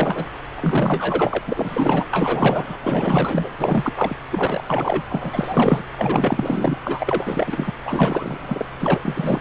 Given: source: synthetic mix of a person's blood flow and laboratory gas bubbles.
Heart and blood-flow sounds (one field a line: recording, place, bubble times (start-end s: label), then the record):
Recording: Doppler ultrasound of blood flow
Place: subclavian vein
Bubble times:
0.00-0.31 s: bubbles
0.55-1.39 s: bubbles
1.47-2.06 s: bubbles
2.12-2.77 s: bubbles
2.83-3.49 s: bubbles
3.58-3.93 s: bubbles
3.96-4.15 s: bubbles
4.31-4.63 s: bubbles
4.67-5.02 s: bubbles
5.09-5.83 s: bubbles
5.96-6.78 s: bubbles
6.83-7.72 s: bubbles
7.85-8.65 s: bubbles
8.79-8.99 s: bubbles
9.04-9.41 s: bubbles
From the record:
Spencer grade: 4 (maximum detectable bubble signal sounding continuously throughout systole and diastole of every cardiac period, and overriding the amplitude of the normal cardiac signals)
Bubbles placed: anywhere in the cardiac cycle